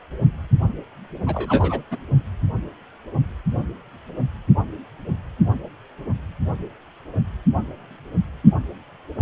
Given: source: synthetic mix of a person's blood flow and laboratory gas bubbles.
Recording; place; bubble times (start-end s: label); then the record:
Doppler ultrasound of blood flow; precordium
1.27-1.82 s: bubbles
1.91-1.97 s: bubbles
From the record:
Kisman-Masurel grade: 211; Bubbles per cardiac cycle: several, 3 to 8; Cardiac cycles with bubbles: 1 to 10%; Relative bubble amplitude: barely perceptible (0.100 to 0.250); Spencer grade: 1 (occasional bubble signal discernible with the cardiac motion signal, with majority of cardiac periods free of bubbles); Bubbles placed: only in the low amplitude regions of the cardiac cycle